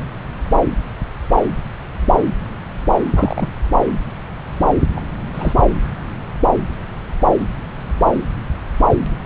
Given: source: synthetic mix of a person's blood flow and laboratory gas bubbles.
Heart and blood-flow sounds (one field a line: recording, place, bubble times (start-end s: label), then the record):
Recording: Doppler ultrasound of blood flow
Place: subclavian vein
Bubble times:
3.15-3.52 s: bubbles
4.96-5.00 s: bubbles
5.34-5.53 s: bubbles
From the record:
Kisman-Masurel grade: 222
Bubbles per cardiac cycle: several, 3 to 8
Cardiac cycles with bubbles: 10 to 50%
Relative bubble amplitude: moderate (0.250 to 0.450)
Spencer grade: 2 (many but less than half of the cardiac periods contain bubble signals, singularly or in groups)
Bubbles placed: anywhere in the cardiac cycle